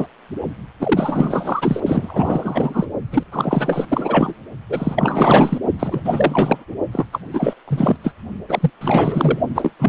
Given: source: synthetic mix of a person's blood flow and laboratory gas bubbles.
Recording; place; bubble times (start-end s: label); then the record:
Doppler ultrasound of blood flow; precordium
0.00-0.07 s: bubbles
0.80-1.80 s: bubbles
1.86-2.86 s: bubbles
3.11-3.23 s: bubbles
3.32-4.33 s: bubbles
4.69-5.58 s: bubbles
5.79-6.01 s: bubbles
6.05-6.65 s: bubbles
6.92-7.05 s: bubbles
7.12-7.20 s: bubbles
7.33-7.54 s: bubbles
7.68-7.96 s: bubbles
8.04-8.12 s: bubbles
8.49-8.71 s: bubbles
8.81-9.39 s: bubbles
9.54-9.72 s: bubbles
9.79-9.89 s: bubbles
From the record:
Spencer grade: 4 (maximum detectable bubble signal sounding continuously throughout systole and diastole of every cardiac period, and overriding the amplitude of the normal cardiac signals); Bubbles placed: only in the low amplitude regions of the cardiac cycle